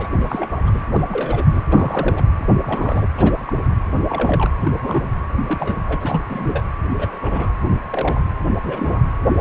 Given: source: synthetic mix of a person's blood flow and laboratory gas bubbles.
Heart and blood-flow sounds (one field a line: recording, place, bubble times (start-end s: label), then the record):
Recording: Doppler ultrasound of blood flow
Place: precordium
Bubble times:
0.00-0.08 s: bubbles
0.21-0.49 s: bubbles
0.66-0.71 s: bubbles
0.74-0.82 s: bubbles
0.93-1.01 s: bubbles
1.09-1.61 s: bubbles
1.68-2.23 s: bubbles
2.38-2.57 s: bubbles
2.60-3.08 s: bubbles
3.17-3.32 s: bubbles
3.45-3.53 s: bubbles
3.92-4.00 s: bubbles
4.09-4.50 s: bubbles
4.60-4.71 s: bubbles
4.83-5.03 s: bubbles
5.46-6.22 s: bubbles
6.29-6.64 s: bubbles
6.97-7.19 s: bubbles
7.21-7.52 s: bubbles
7.90-8.21 s: bubbles
8.63-9.02 s: bubbles
9.36-9.41 s: bubbles
From the record:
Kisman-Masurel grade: 242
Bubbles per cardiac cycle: several, 3 to 8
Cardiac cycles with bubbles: 100%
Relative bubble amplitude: moderate (0.250 to 0.450)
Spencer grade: 3 (all of the cardiac periods contain showers or single bubble signals, but not dominating or overriding the cardiac motion signals)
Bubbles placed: anywhere in the cardiac cycle